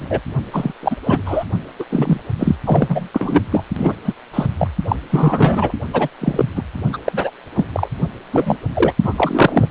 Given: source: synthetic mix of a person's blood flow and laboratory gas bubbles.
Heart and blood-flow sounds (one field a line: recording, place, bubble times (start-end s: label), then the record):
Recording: Doppler ultrasound of blood flow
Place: precordium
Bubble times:
0.00-0.20 s: bubbles
0.53-0.72 s: bubbles
0.82-0.96 s: bubbles
1.03-1.21 s: bubbles
1.25-1.44 s: bubbles
1.79-1.85 s: bubbles
1.90-2.21 s: bubbles
2.38-2.56 s: bubbles
2.65-3.08 s: bubbles
3.13-3.41 s: bubbles
3.52-3.63 s: bubbles
3.77-3.94 s: bubbles
4.04-4.13 s: bubbles
4.33-4.46 s: bubbles
4.58-4.68 s: bubbles
4.88-4.96 s: bubbles
5.09-5.72 s: bubbles
5.93-6.08 s: bubbles
6.20-6.45 s: bubbles
6.55-6.63 s: bubbles
6.92-6.97 s: bubbles
7.05-7.30 s: bubbles
7.54-7.66 s: bubbles
7.73-7.88 s: bubbles
8.31-8.57 s: bubbles
8.73-8.93 s: bubbles
9.03-9.14 s: bubbles
9.17-9.67 s: bubbles
From the record:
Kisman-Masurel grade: 243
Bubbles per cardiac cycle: several, 3 to 8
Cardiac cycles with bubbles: 100%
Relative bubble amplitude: loud (0.450 to 0.775)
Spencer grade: 3 (all of the cardiac periods contain showers or single bubble signals, but not dominating or overriding the cardiac motion signals)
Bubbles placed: only in the low amplitude regions of the cardiac cycle